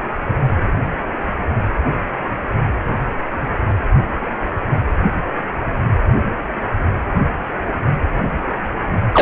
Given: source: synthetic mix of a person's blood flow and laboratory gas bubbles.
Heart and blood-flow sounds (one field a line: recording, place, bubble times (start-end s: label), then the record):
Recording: Doppler ultrasound of blood flow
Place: precordium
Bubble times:
9.12-9.22 s: bubbles
From the record:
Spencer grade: 1 (occasional bubble signal discernible with the cardiac motion signal, with majority of cardiac periods free of bubbles)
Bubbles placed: anywhere in the cardiac cycle